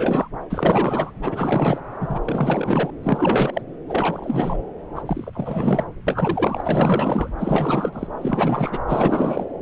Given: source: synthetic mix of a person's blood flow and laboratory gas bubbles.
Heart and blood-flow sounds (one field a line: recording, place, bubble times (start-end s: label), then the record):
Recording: Doppler ultrasound of blood flow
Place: subclavian vein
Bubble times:
0.00-0.29 s: bubbles
0.49-1.13 s: bubbles
1.21-1.81 s: bubbles
2.00-2.21 s: bubbles
2.25-2.90 s: bubbles
3.03-3.61 s: bubbles
3.88-4.63 s: bubbles
4.95-5.02 s: bubbles
5.05-5.84 s: bubbles
6.06-7.30 s: bubbles
7.38-8.07 s: bubbles
8.21-8.79 s: bubbles
8.88-9.46 s: bubbles
From the record:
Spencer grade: 4 (maximum detectable bubble signal sounding continuously throughout systole and diastole of every cardiac period, and overriding the amplitude of the normal cardiac signals)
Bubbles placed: anywhere in the cardiac cycle